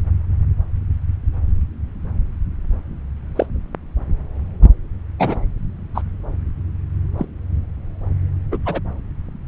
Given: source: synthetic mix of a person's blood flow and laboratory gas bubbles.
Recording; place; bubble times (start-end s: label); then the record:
Doppler ultrasound of blood flow; subclavian vein
3.35-3.46 s: bubbles
5.18-5.40 s: bubbles
5.94-6.01 s: bubbles
7.17-7.25 s: bubbles
8.52-8.58 s: bubbles
8.65-8.80 s: bubbles
From the record:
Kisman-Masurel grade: 122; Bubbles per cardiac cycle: 1 to 2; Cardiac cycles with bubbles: 10 to 50%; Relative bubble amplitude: moderate (0.250 to 0.450); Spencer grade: 2 (many but less than half of the cardiac periods contain bubble signals, singularly or in groups); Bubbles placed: anywhere in the cardiac cycle